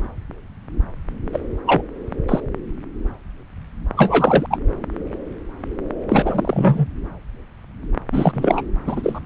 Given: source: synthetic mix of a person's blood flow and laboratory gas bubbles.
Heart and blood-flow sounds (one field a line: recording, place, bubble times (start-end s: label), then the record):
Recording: Doppler ultrasound of blood flow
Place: subclavian vein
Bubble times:
1.32-1.40 s: bubbles
1.66-1.81 s: bubbles
2.28-2.40 s: bubbles
3.96-4.46 s: bubbles
4.50-4.58 s: bubbles
6.08-6.87 s: bubbles
8.12-8.61 s: bubbles
8.87-9.20 s: bubbles
From the record:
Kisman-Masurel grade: 223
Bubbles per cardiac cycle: several, 3 to 8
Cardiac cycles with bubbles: 10 to 50%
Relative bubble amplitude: loud (0.450 to 0.775)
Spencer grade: 2 (many but less than half of the cardiac periods contain bubble signals, singularly or in groups)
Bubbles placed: anywhere in the cardiac cycle